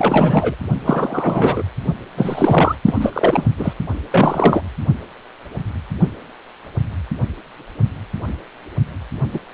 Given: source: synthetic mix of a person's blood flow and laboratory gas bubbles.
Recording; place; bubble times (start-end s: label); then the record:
Doppler ultrasound of blood flow; precordium
0.00-0.55 s: bubbles
0.78-1.62 s: bubbles
2.17-2.76 s: bubbles
2.85-3.46 s: bubbles
3.57-3.74 s: bubbles
4.12-4.62 s: bubbles
9.34-9.39 s: bubbles
From the record:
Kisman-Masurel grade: 333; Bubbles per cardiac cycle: rolling drumbeat, 9 or more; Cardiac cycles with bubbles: 50 to 99%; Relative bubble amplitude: loud (0.450 to 0.775); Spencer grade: 3 (all of the cardiac periods contain showers or single bubble signals, but not dominating or overriding the cardiac motion signals); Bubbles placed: only in the low amplitude regions of the cardiac cycle